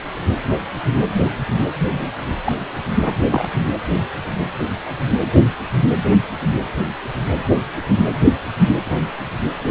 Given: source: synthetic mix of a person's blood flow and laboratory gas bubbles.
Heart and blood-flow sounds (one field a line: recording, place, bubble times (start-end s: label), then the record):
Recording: Doppler ultrasound of blood flow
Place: precordium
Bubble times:
1.79-2.07 s: bubbles
2.44-2.52 s: bubbles
3.05-3.13 s: bubbles
3.31-3.47 s: bubbles
8.85-8.98 s: bubbles
From the record:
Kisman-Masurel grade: 122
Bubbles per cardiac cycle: 1 to 2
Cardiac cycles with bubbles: 10 to 50%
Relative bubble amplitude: moderate (0.250 to 0.450)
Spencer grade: 2 (many but less than half of the cardiac periods contain bubble signals, singularly or in groups)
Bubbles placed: anywhere in the cardiac cycle